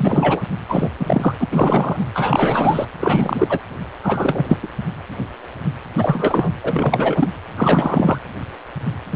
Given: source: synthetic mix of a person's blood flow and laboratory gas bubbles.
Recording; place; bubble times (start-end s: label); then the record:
Doppler ultrasound of blood flow; precordium
0.00-0.43 s: bubbles
0.68-0.90 s: bubbles
0.99-1.34 s: bubbles
1.40-1.48 s: bubbles
1.51-2.05 s: bubbles
2.14-2.85 s: bubbles
3.00-3.59 s: bubbles
4.03-4.46 s: bubbles
4.49-4.58 s: bubbles
4.62-4.67 s: bubbles
5.97-6.51 s: bubbles
6.63-7.29 s: bubbles
7.57-8.18 s: bubbles
9.11-9.16 s: bubbles
From the record:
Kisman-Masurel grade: 333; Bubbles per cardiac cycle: rolling drumbeat, 9 or more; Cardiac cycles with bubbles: 50 to 99%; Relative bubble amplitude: loud (0.450 to 0.775); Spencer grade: 3 (all of the cardiac periods contain showers or single bubble signals, but not dominating or overriding the cardiac motion signals); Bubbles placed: anywhere in the cardiac cycle